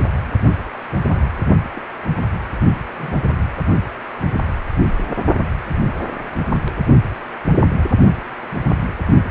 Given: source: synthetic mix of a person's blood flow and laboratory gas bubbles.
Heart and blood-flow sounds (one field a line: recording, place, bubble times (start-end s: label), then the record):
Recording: Doppler ultrasound of blood flow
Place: precordium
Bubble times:
1.06-1.28 s: bubbles
1.73-1.81 s: bubbles
2.97-3.17 s: bubbles
From the record:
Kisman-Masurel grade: 121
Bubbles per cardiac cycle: 1 to 2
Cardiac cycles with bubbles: 10 to 50%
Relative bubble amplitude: barely perceptible (0.100 to 0.250)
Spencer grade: 2 (many but less than half of the cardiac periods contain bubble signals, singularly or in groups)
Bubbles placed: only in the low amplitude regions of the cardiac cycle